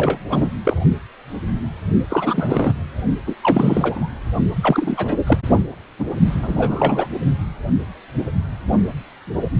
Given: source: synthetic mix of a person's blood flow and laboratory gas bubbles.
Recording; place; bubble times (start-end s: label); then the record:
Doppler ultrasound of blood flow; precordium
0.00-0.19 s: bubbles
0.28-0.50 s: bubbles
0.65-0.76 s: bubbles
2.09-2.72 s: bubbles
3.26-3.34 s: bubbles
3.42-4.09 s: bubbles
4.61-5.16 s: bubbles
5.26-5.38 s: bubbles
5.58-5.66 s: bubbles
5.98-6.15 s: bubbles
6.42-7.08 s: bubbles
From the record:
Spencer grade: 3 (all of the cardiac periods contain showers or single bubble signals, but not dominating or overriding the cardiac motion signals); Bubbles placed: only in the low amplitude regions of the cardiac cycle